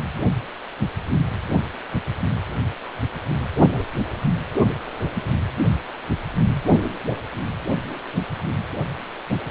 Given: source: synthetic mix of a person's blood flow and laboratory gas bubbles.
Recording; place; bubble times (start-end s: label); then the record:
Doppler ultrasound of blood flow; precordium
no bubbles
From the record:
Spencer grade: 0 (complete lack of bubble signals)